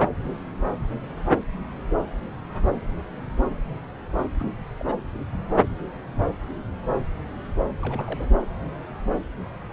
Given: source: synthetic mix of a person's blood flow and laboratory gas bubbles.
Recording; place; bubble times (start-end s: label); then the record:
Doppler ultrasound of blood flow; subclavian vein
4.39-4.55 s: bubbles
4.79-4.94 s: bubbles
7.81-8.37 s: bubbles
From the record:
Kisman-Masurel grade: 211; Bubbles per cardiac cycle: several, 3 to 8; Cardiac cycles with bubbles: 1 to 10%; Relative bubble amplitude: barely perceptible (0.100 to 0.250); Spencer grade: 1 (occasional bubble signal discernible with the cardiac motion signal, with majority of cardiac periods free of bubbles); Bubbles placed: anywhere in the cardiac cycle